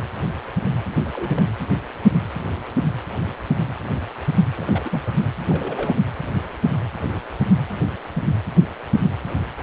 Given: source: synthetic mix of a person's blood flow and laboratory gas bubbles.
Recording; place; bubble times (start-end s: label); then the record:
Doppler ultrasound of blood flow; precordium
0.95-1.44 s: bubbles
4.58-5.02 s: bubbles
5.05-5.14 s: bubbles
5.50-5.97 s: bubbles
From the record:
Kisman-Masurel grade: 221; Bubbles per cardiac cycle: several, 3 to 8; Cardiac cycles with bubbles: 10 to 50%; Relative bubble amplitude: barely perceptible (0.100 to 0.250); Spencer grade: 2 (many but less than half of the cardiac periods contain bubble signals, singularly or in groups); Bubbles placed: anywhere in the cardiac cycle